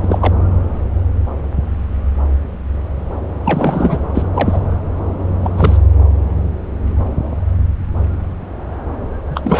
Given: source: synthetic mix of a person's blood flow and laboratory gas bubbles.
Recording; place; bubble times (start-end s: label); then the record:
Doppler ultrasound of blood flow; subclavian vein
0.00-0.34 s: bubbles
3.44-4.00 s: bubbles
4.15-4.23 s: bubbles
4.35-4.62 s: bubbles
5.41-5.78 s: bubbles
9.27-9.60 s: bubbles
From the record:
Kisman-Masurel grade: 222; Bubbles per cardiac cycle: several, 3 to 8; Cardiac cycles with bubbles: 10 to 50%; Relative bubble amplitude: moderate (0.250 to 0.450); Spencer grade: 2 (many but less than half of the cardiac periods contain bubble signals, singularly or in groups); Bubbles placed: anywhere in the cardiac cycle